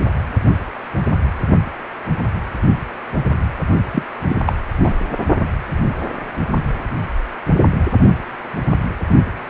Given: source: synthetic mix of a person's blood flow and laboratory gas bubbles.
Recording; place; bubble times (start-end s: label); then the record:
Doppler ultrasound of blood flow; precordium
3.92-4.02 s: bubbles
4.29-4.36 s: bubbles
4.46-4.52 s: bubbles
4.83-4.95 s: bubbles
From the record:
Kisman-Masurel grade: 213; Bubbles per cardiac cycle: several, 3 to 8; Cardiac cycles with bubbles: 1 to 10%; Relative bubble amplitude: loud (0.450 to 0.775); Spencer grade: 1 (occasional bubble signal discernible with the cardiac motion signal, with majority of cardiac periods free of bubbles); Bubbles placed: only in the low amplitude regions of the cardiac cycle